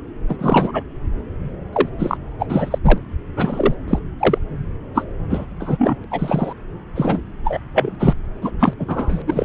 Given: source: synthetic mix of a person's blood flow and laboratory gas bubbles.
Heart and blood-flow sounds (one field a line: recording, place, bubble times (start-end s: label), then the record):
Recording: Doppler ultrasound of blood flow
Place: subclavian vein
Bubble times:
0.29-0.83 s: bubbles
1.73-1.89 s: bubbles
1.98-2.17 s: bubbles
2.39-2.46 s: bubbles
2.48-2.79 s: bubbles
2.83-2.98 s: bubbles
3.37-3.74 s: bubbles
3.88-3.99 s: bubbles
4.19-4.38 s: bubbles
4.94-5.05 s: bubbles
5.29-5.46 s: bubbles
5.59-5.96 s: bubbles
6.10-6.53 s: bubbles
6.95-7.22 s: bubbles
7.44-7.60 s: bubbles
7.74-7.96 s: bubbles
7.99-8.13 s: bubbles
8.41-8.51 s: bubbles
8.59-8.73 s: bubbles
8.79-9.22 s: bubbles
9.27-9.44 s: bubbles
From the record:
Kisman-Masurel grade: 243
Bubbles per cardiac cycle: several, 3 to 8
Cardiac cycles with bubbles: 100%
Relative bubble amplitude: loud (0.450 to 0.775)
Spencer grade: 3 (all of the cardiac periods contain showers or single bubble signals, but not dominating or overriding the cardiac motion signals)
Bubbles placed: anywhere in the cardiac cycle